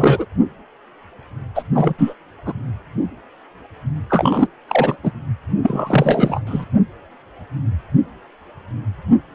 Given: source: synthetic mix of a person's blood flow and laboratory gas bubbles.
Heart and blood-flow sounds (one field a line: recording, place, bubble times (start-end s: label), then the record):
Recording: Doppler ultrasound of blood flow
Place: precordium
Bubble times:
0.00-0.26 s: bubbles
1.54-1.63 s: bubbles
1.75-1.94 s: bubbles
1.98-2.13 s: bubbles
2.45-2.54 s: bubbles
4.10-4.48 s: bubbles
4.68-4.97 s: bubbles
5.03-5.12 s: bubbles
5.62-6.40 s: bubbles
6.46-6.65 s: bubbles
From the record:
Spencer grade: 2 (many but less than half of the cardiac periods contain bubble signals, singularly or in groups)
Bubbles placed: anywhere in the cardiac cycle